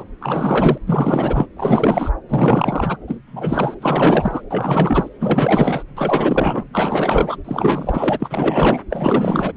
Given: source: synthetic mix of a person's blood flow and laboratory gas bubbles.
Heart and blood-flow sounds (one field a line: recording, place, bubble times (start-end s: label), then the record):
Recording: Doppler ultrasound of blood flow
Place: subclavian vein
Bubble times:
0.00-0.04 s: bubbles
0.21-0.78 s: bubbles
0.86-1.46 s: bubbles
1.56-2.11 s: bubbles
2.29-2.98 s: bubbles
3.07-3.19 s: bubbles
3.26-3.75 s: bubbles
3.81-4.42 s: bubbles
4.51-5.08 s: bubbles
5.19-5.83 s: bubbles
5.96-6.64 s: bubbles
6.73-7.37 s: bubbles
7.45-8.79 s: bubbles
8.90-9.53 s: bubbles
From the record:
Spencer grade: 4 (maximum detectable bubble signal sounding continuously throughout systole and diastole of every cardiac period, and overriding the amplitude of the normal cardiac signals)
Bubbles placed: anywhere in the cardiac cycle